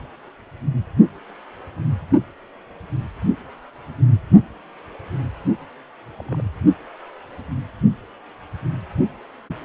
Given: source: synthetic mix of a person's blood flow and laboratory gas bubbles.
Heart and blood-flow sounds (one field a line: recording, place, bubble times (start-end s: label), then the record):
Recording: Doppler ultrasound of blood flow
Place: precordium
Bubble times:
6.18-6.42 s: bubbles
From the record:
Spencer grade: 1 (occasional bubble signal discernible with the cardiac motion signal, with majority of cardiac periods free of bubbles)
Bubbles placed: only in the low amplitude regions of the cardiac cycle